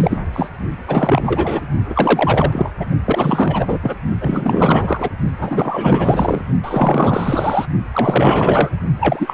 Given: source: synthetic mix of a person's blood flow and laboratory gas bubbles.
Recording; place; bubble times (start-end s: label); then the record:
Doppler ultrasound of blood flow; precordium
0.00-0.19 s: bubbles
0.33-0.49 s: bubbles
0.88-1.61 s: bubbles
1.90-2.71 s: bubbles
2.79-2.86 s: bubbles
3.04-3.79 s: bubbles
3.82-3.96 s: bubbles
4.21-5.09 s: bubbles
5.38-6.41 s: bubbles
6.63-7.65 s: bubbles
7.94-8.70 s: bubbles
8.99-9.34 s: bubbles
From the record:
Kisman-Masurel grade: 444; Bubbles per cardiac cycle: continuous sound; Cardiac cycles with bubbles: 100%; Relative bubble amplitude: maximal (0.775 to 0.999); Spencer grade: 4 (maximum detectable bubble signal sounding continuously throughout systole and diastole of every cardiac period, and overriding the amplitude of the normal cardiac signals); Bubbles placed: only in the low amplitude regions of the cardiac cycle